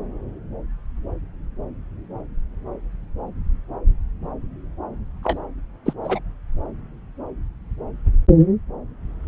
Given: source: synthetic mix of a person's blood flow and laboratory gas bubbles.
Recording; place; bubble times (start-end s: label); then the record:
Doppler ultrasound of blood flow; subclavian vein
5.22-5.38 s: bubbles
5.85-5.93 s: bubbles
6.04-6.19 s: bubbles
From the record:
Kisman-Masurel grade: 213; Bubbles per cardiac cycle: several, 3 to 8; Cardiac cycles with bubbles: 1 to 10%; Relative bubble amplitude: loud (0.450 to 0.775); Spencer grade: 1 (occasional bubble signal discernible with the cardiac motion signal, with majority of cardiac periods free of bubbles); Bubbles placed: anywhere in the cardiac cycle